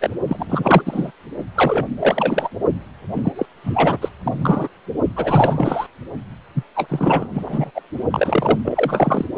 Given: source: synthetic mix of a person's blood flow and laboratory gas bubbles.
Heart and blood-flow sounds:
Doppler ultrasound of blood flow; precordium
0.01-0.10 s: bubbles
0.28-0.82 s: bubbles
0.85-1.12 s: bubbles
1.54-1.87 s: bubbles
2.00-2.49 s: bubbles
3.13-3.32 s: bubbles
3.35-3.46 s: bubbles
3.63-3.97 s: bubbles
4.01-4.08 s: bubbles
4.22-4.68 s: bubbles
5.16-5.87 s: bubbles
6.54-6.63 s: bubbles
6.75-7.27 s: bubbles
7.33-7.71 s: bubbles
7.75-7.81 s: bubbles
8.11-8.59 s: bubbles
8.64-9.25 s: bubbles
From the record:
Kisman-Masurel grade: 343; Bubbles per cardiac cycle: rolling drumbeat, 9 or more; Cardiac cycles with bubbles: 100%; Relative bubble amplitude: loud (0.450 to 0.775); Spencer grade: 3 (all of the cardiac periods contain showers or single bubble signals, but not dominating or overriding the cardiac motion signals); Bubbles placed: only in the low amplitude regions of the cardiac cycle

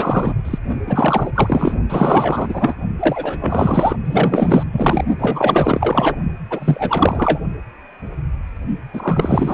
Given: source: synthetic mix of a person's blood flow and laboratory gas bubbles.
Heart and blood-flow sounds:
Doppler ultrasound of blood flow; precordium
0.00-0.33 s: bubbles
0.45-0.58 s: bubbles
0.87-1.32 s: bubbles
1.35-1.77 s: bubbles
1.90-2.76 s: bubbles
2.99-3.96 s: bubbles
4.04-4.63 s: bubbles
4.72-5.04 s: bubbles
5.18-6.16 s: bubbles
6.50-7.40 s: bubbles
8.93-9.54 s: bubbles
From the record:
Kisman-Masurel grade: 444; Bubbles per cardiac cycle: continuous sound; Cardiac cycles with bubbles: 100%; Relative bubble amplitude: maximal (0.775 to 0.999); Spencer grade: 4 (maximum detectable bubble signal sounding continuously throughout systole and diastole of every cardiac period, and overriding the amplitude of the normal cardiac signals); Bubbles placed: only in the low amplitude regions of the cardiac cycle

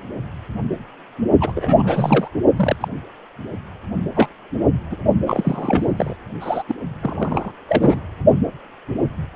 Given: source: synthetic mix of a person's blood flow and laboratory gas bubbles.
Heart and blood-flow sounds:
Doppler ultrasound of blood flow; precordium
1.40-1.52 s: bubbles
1.55-2.28 s: bubbles
2.55-2.76 s: bubbles
2.80-2.88 s: bubbles
4.15-4.29 s: bubbles
4.91-4.97 s: bubbles
5.25-5.93 s: bubbles
5.96-6.17 s: bubbles
6.41-6.63 s: bubbles
6.68-6.75 s: bubbles
7.02-7.52 s: bubbles
7.68-8.00 s: bubbles
From the record:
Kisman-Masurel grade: 232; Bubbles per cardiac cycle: several, 3 to 8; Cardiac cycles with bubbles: 50 to 99%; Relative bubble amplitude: moderate (0.250 to 0.450); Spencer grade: 3 (all of the cardiac periods contain showers or single bubble signals, but not dominating or overriding the cardiac motion signals); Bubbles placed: only in the low amplitude regions of the cardiac cycle

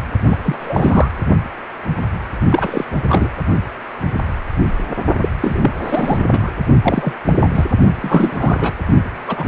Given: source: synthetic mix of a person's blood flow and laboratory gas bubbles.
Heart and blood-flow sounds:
Doppler ultrasound of blood flow; precordium
0.28-0.38 s: bubbles
0.43-1.11 s: bubbles
2.49-2.84 s: bubbles
3.08-3.29 s: bubbles
5.21-5.29 s: bubbles
5.40-5.70 s: bubbles
5.84-6.25 s: bubbles
6.31-6.51 s: bubbles
6.83-7.12 s: bubbles
7.25-7.34 s: bubbles
7.41-7.64 s: bubbles
8.00-8.72 s: bubbles
9.28-9.48 s: bubbles
From the record:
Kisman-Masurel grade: 333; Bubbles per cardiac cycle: rolling drumbeat, 9 or more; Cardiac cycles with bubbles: 50 to 99%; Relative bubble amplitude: loud (0.450 to 0.775); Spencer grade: 3 (all of the cardiac periods contain showers or single bubble signals, but not dominating or overriding the cardiac motion signals); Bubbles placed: only in the low amplitude regions of the cardiac cycle

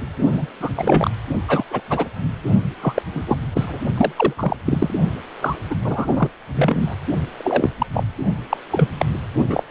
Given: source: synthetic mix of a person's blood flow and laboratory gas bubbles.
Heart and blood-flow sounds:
Doppler ultrasound of blood flow; precordium
0.31-0.46 s: bubbles
0.60-0.69 s: bubbles
0.75-1.10 s: bubbles
1.47-1.64 s: bubbles
1.71-1.81 s: bubbles
1.90-2.08 s: bubbles
2.81-3.02 s: bubbles
3.14-3.24 s: bubbles
3.26-3.39 s: bubbles
3.53-3.78 s: bubbles
3.97-4.12 s: bubbles
4.16-4.33 s: bubbles
4.38-4.56 s: bubbles
4.66-4.93 s: bubbles
5.41-5.56 s: bubbles
5.70-5.75 s: bubbles
5.84-6.29 s: bubbles
6.54-6.96 s: bubbles
7.38-7.70 s: bubbles
7.78-7.86 s: bubbles
7.92-8.04 s: bubbles
8.49-8.57 s: bubbles
8.71-8.89 s: bubbles
8.98-9.06 s: bubbles
9.48-9.63 s: bubbles
From the record:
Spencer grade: 3 (all of the cardiac periods contain showers or single bubble signals, but not dominating or overriding the cardiac motion signals); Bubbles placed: only in the low amplitude regions of the cardiac cycle

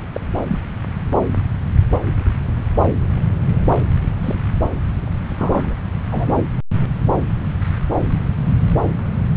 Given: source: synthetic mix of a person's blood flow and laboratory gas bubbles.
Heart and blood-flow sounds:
Doppler ultrasound of blood flow; subclavian vein
0.12-0.21 s: bubbles
0.48-0.59 s: bubbles
4.23-4.35 s: bubbles
5.37-5.76 s: bubbles
6.11-6.34 s: bubbles
From the record:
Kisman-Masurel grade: 122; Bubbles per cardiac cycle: 1 to 2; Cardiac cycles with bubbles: 10 to 50%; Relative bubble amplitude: moderate (0.250 to 0.450); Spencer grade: 2 (many but less than half of the cardiac periods contain bubble signals, singularly or in groups); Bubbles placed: anywhere in the cardiac cycle

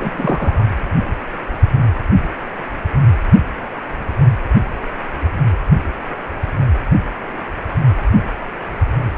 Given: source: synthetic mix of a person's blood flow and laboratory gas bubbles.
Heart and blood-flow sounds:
Doppler ultrasound of blood flow; precordium
0.00-0.65 s: bubbles
From the record:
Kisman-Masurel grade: 112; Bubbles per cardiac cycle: 1 to 2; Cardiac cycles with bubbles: 1 to 10%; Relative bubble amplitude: moderate (0.250 to 0.450); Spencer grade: 1 (occasional bubble signal discernible with the cardiac motion signal, with majority of cardiac periods free of bubbles); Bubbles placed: anywhere in the cardiac cycle

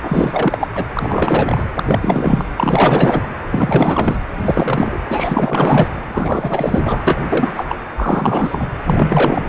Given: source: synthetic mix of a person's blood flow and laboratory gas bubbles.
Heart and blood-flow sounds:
Doppler ultrasound of blood flow; precordium
0.02-0.68 s: bubbles
0.75-0.85 s: bubbles
0.94-1.65 s: bubbles
1.76-2.44 s: bubbles
2.56-3.28 s: bubbles
3.50-4.17 s: bubbles
4.44-4.99 s: bubbles
5.09-5.88 s: bubbles
6.08-7.52 s: bubbles
7.56-7.65 s: bubbles
7.69-7.76 s: bubbles
7.97-8.67 s: bubbles
8.85-9.49 s: bubbles
From the record:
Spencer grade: 4 (maximum detectable bubble signal sounding continuously throughout systole and diastole of every cardiac period, and overriding the amplitude of the normal cardiac signals); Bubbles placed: anywhere in the cardiac cycle

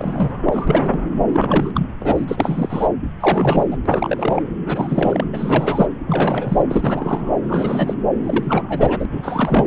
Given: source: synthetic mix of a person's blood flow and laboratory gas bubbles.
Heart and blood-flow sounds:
Doppler ultrasound of blood flow; subclavian vein
0.00-0.31 s: bubbles
0.46-1.00 s: bubbles
1.32-1.87 s: bubbles
1.99-2.25 s: bubbles
2.28-2.88 s: bubbles
3.20-3.77 s: bubbles
3.85-4.42 s: bubbles
4.65-5.25 s: bubbles
5.33-5.88 s: bubbles
6.06-6.63 s: bubbles
6.69-7.36 s: bubbles
7.48-7.94 s: bubbles
8.24-9.06 s: bubbles
9.12-9.66 s: bubbles
From the record:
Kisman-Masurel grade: 332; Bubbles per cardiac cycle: rolling drumbeat, 9 or more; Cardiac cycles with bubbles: 50 to 99%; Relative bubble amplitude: moderate (0.250 to 0.450); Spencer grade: 3 (all of the cardiac periods contain showers or single bubble signals, but not dominating or overriding the cardiac motion signals); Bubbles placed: anywhere in the cardiac cycle

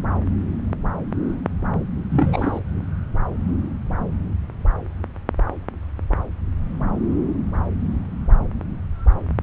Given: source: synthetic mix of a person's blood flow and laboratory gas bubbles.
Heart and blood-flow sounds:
Doppler ultrasound of blood flow; subclavian vein
2.10-2.60 s: bubbles
From the record:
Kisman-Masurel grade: 213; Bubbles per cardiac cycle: several, 3 to 8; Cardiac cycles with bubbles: 1 to 10%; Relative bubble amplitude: loud (0.450 to 0.775); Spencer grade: 1 (occasional bubble signal discernible with the cardiac motion signal, with majority of cardiac periods free of bubbles); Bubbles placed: anywhere in the cardiac cycle

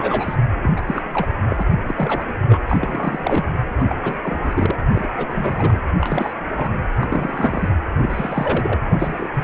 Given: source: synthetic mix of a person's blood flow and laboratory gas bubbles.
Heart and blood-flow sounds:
Doppler ultrasound of blood flow; precordium
0.00-0.34 s: bubbles
0.62-0.69 s: bubbles
0.76-0.84 s: bubbles
0.87-1.04 s: bubbles
1.12-1.27 s: bubbles
1.50-1.63 s: bubbles
1.87-1.95 s: bubbles
1.97-2.33 s: bubbles
2.49-2.59 s: bubbles
2.69-3.50 s: bubbles
3.79-3.84 s: bubbles
3.90-3.98 s: bubbles
4.03-4.20 s: bubbles
4.23-4.75 s: bubbles
4.92-5.08 s: bubbles
5.17-5.79 s: bubbles
5.99-6.33 s: bubbles
6.57-6.69 s: bubbles
7.00-7.07 s: bubbles
7.10-7.69 s: bubbles
7.98-8.78 s: bubbles
8.88-9.28 s: bubbles
9.33-9.44 s: bubbles
From the record:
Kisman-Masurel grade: 242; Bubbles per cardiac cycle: several, 3 to 8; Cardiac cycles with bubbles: 100%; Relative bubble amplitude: moderate (0.250 to 0.450); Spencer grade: 3 (all of the cardiac periods contain showers or single bubble signals, but not dominating or overriding the cardiac motion signals); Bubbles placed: anywhere in the cardiac cycle

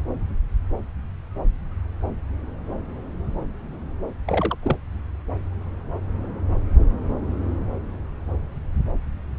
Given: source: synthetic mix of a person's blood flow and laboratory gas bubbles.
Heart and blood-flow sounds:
Doppler ultrasound of blood flow; subclavian vein
4.27-4.56 s: bubbles
4.62-4.77 s: bubbles
From the record:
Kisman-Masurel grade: 211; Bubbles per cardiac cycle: several, 3 to 8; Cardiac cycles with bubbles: 1 to 10%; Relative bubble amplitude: barely perceptible (0.100 to 0.250); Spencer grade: 1 (occasional bubble signal discernible with the cardiac motion signal, with majority of cardiac periods free of bubbles); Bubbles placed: anywhere in the cardiac cycle

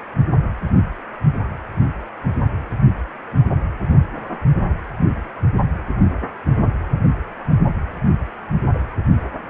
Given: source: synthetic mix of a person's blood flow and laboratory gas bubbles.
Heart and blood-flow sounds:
Doppler ultrasound of blood flow; precordium
8.74-8.79 s: bubbles
From the record:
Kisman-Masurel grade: 111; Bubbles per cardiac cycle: 1 to 2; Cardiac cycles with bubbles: 1 to 10%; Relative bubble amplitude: barely perceptible (0.100 to 0.250); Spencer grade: 1 (occasional bubble signal discernible with the cardiac motion signal, with majority of cardiac periods free of bubbles); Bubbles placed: only in the low amplitude regions of the cardiac cycle

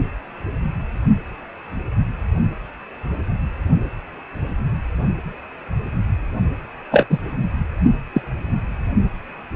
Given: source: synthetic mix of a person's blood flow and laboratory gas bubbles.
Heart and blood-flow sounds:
Doppler ultrasound of blood flow; precordium
6.91-7.07 s: bubbles
7.09-7.19 s: bubbles
8.13-8.21 s: bubbles
From the record:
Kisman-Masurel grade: 123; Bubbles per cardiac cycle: 1 to 2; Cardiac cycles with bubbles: 10 to 50%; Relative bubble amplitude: loud (0.450 to 0.775); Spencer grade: 2 (many but less than half of the cardiac periods contain bubble signals, singularly or in groups); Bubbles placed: only in the low amplitude regions of the cardiac cycle

